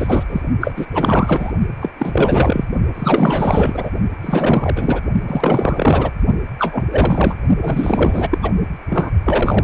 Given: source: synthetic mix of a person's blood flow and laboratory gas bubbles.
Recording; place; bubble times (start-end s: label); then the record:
Doppler ultrasound of blood flow; precordium
0.00-0.24 s: bubbles
0.29-0.41 s: bubbles
0.60-0.86 s: bubbles
0.93-1.53 s: bubbles
1.80-1.90 s: bubbles
1.99-2.65 s: bubbles
2.94-3.91 s: bubbles
4.21-5.00 s: bubbles
5.27-6.12 s: bubbles
6.58-6.84 s: bubbles
6.91-7.35 s: bubbles
7.61-8.28 s: bubbles
8.31-8.38 s: bubbles
8.42-8.53 s: bubbles
8.90-9.11 s: bubbles
9.25-9.64 s: bubbles
From the record:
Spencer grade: 4 (maximum detectable bubble signal sounding continuously throughout systole and diastole of every cardiac period, and overriding the amplitude of the normal cardiac signals); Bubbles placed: only in the low amplitude regions of the cardiac cycle